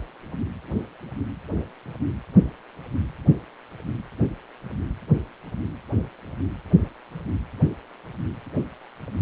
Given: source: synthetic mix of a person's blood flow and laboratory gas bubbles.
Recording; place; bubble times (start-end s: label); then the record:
Doppler ultrasound of blood flow; precordium
no bubbles
From the record:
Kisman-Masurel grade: 000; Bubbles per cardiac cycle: 0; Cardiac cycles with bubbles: 0%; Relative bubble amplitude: no bubbles discernible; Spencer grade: 0 (complete lack of bubble signals)